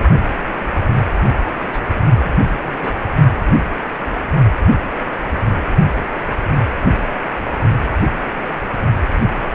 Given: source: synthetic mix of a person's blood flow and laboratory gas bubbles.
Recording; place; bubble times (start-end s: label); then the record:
Doppler ultrasound of blood flow; precordium
1.62-2.01 s: bubbles
2.06-2.35 s: bubbles
2.62-3.00 s: bubbles
From the record:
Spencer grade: 1 (occasional bubble signal discernible with the cardiac motion signal, with majority of cardiac periods free of bubbles); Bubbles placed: only in the low amplitude regions of the cardiac cycle